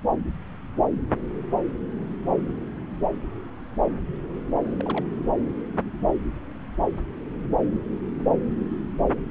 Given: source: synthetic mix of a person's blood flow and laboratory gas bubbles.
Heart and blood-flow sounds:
Doppler ultrasound of blood flow; subclavian vein
4.80-4.83 s: bubbles
4.85-5.06 s: bubbles
From the record:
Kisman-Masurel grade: 211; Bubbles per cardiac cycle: several, 3 to 8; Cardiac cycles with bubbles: 1 to 10%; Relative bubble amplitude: barely perceptible (0.100 to 0.250); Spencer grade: 1 (occasional bubble signal discernible with the cardiac motion signal, with majority of cardiac periods free of bubbles); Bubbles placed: anywhere in the cardiac cycle

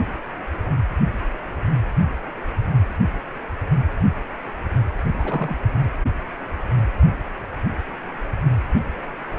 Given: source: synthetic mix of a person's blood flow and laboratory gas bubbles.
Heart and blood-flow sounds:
Doppler ultrasound of blood flow; precordium
5.19-5.55 s: bubbles
From the record:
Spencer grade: 1 (occasional bubble signal discernible with the cardiac motion signal, with majority of cardiac periods free of bubbles); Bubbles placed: anywhere in the cardiac cycle

